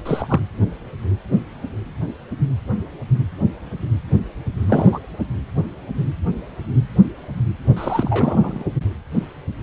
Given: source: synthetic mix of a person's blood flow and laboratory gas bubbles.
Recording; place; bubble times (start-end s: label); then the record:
Doppler ultrasound of blood flow; precordium
0.05-0.40 s: bubbles
4.68-5.00 s: bubbles
7.76-8.63 s: bubbles
From the record:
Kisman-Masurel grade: 222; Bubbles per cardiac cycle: several, 3 to 8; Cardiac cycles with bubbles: 10 to 50%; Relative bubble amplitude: moderate (0.250 to 0.450); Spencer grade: 2 (many but less than half of the cardiac periods contain bubble signals, singularly or in groups); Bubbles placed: anywhere in the cardiac cycle